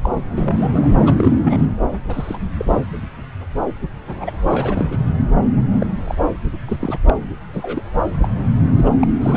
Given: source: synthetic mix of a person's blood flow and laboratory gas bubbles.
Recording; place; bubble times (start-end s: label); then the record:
Doppler ultrasound of blood flow; subclavian vein
0.01-0.11 s: bubbles
0.15-0.20 s: bubbles
0.37-0.89 s: bubbles
1.05-1.15 s: bubbles
1.19-1.71 s: bubbles
2.07-2.39 s: bubbles
2.58-2.66 s: bubbles
3.82-3.88 s: bubbles
4.08-4.31 s: bubbles
4.50-4.96 s: bubbles
5.80-5.87 s: bubbles
6.04-6.15 s: bubbles
6.53-6.57 s: bubbles
6.69-6.98 s: bubbles
7.05-7.14 s: bubbles
7.53-7.82 s: bubbles
8.22-8.29 s: bubbles
8.75-8.89 s: bubbles
9.00-9.07 s: bubbles
9.21-9.37 s: bubbles
From the record:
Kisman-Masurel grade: 242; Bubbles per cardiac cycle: several, 3 to 8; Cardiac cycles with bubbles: 100%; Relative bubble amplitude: moderate (0.250 to 0.450); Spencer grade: 3 (all of the cardiac periods contain showers or single bubble signals, but not dominating or overriding the cardiac motion signals); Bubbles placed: anywhere in the cardiac cycle